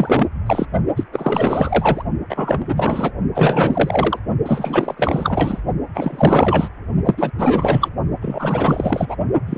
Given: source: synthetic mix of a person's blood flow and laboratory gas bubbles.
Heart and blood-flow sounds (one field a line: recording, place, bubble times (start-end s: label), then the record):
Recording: Doppler ultrasound of blood flow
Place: precordium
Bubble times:
0.00-0.28 s: bubbles
0.46-0.66 s: bubbles
0.96-1.04 s: bubbles
1.12-2.03 s: bubbles
2.29-2.65 s: bubbles
2.68-3.12 s: bubbles
3.34-4.19 s: bubbles
4.45-5.61 s: bubbles
5.95-6.69 s: bubbles
7.04-7.31 s: bubbles
7.38-7.89 s: bubbles
8.21-9.16 s: bubbles
9.46-9.58 s: bubbles
From the record:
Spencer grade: 4 (maximum detectable bubble signal sounding continuously throughout systole and diastole of every cardiac period, and overriding the amplitude of the normal cardiac signals)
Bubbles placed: only in the low amplitude regions of the cardiac cycle